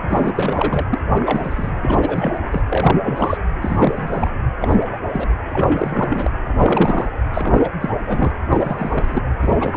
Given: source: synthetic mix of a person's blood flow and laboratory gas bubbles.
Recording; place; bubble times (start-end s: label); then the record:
Doppler ultrasound of blood flow; precordium
0.09-0.86 s: bubbles
0.91-0.99 s: bubbles
1.11-1.70 s: bubbles
1.82-2.38 s: bubbles
2.52-2.62 s: bubbles
2.70-2.97 s: bubbles
3.01-3.38 s: bubbles
3.61-4.31 s: bubbles
4.61-4.98 s: bubbles
5.09-5.28 s: bubbles
5.47-6.31 s: bubbles
6.44-7.11 s: bubbles
7.33-7.70 s: bubbles
7.81-7.90 s: bubbles
8.04-8.32 s: bubbles
8.49-9.22 s: bubbles
9.38-9.77 s: bubbles
From the record:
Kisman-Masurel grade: 342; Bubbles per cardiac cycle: rolling drumbeat, 9 or more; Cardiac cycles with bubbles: 100%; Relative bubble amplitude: moderate (0.250 to 0.450); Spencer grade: 3 (all of the cardiac periods contain showers or single bubble signals, but not dominating or overriding the cardiac motion signals); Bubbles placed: anywhere in the cardiac cycle